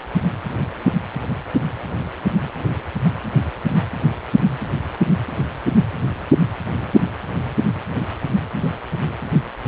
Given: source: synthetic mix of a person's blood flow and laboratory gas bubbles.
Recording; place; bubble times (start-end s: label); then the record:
Doppler ultrasound of blood flow; precordium
no bubbles
From the record:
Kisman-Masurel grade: 000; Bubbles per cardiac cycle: 0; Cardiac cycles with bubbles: 0%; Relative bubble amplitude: no bubbles discernible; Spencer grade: 0 (complete lack of bubble signals)